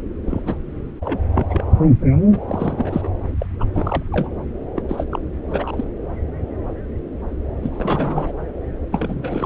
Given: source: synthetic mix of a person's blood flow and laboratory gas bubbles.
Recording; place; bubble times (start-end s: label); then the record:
Doppler ultrasound of blood flow; subclavian vein
0.27-0.43 s: bubbles
0.46-0.55 s: bubbles
0.99-1.24 s: bubbles
1.33-1.47 s: bubbles
1.49-1.65 s: bubbles
2.31-2.40 s: bubbles
2.47-3.09 s: bubbles
3.39-3.46 s: bubbles
3.59-3.65 s: bubbles
3.73-4.03 s: bubbles
4.12-4.31 s: bubbles
4.76-4.83 s: bubbles
4.89-5.05 s: bubbles
5.11-5.20 s: bubbles
5.47-5.84 s: bubbles
7.62-8.33 s: bubbles
8.92-9.46 s: bubbles
From the record:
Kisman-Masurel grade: 332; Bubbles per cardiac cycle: rolling drumbeat, 9 or more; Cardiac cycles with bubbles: 50 to 99%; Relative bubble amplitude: moderate (0.250 to 0.450); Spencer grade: 3 (all of the cardiac periods contain showers or single bubble signals, but not dominating or overriding the cardiac motion signals); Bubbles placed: anywhere in the cardiac cycle